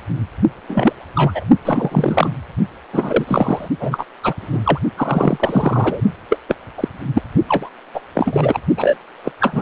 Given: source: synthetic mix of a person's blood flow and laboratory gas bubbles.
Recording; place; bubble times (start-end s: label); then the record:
Doppler ultrasound of blood flow; precordium
0.68-0.93 s: bubbles
1.15-1.44 s: bubbles
1.65-2.35 s: bubbles
2.93-3.68 s: bubbles
3.80-4.05 s: bubbles
4.23-4.33 s: bubbles
4.38-4.79 s: bubbles
4.97-6.00 s: bubbles
6.29-6.38 s: bubbles
6.47-6.55 s: bubbles
6.77-6.88 s: bubbles
7.14-7.22 s: bubbles
7.48-7.70 s: bubbles
7.94-8.00 s: bubbles
8.14-8.59 s: bubbles
8.77-8.97 s: bubbles
9.23-9.32 s: bubbles
9.40-9.62 s: bubbles
From the record:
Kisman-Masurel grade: 233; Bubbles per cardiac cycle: several, 3 to 8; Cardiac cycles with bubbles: 50 to 99%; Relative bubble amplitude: loud (0.450 to 0.775); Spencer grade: 3 (all of the cardiac periods contain showers or single bubble signals, but not dominating or overriding the cardiac motion signals); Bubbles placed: only in the low amplitude regions of the cardiac cycle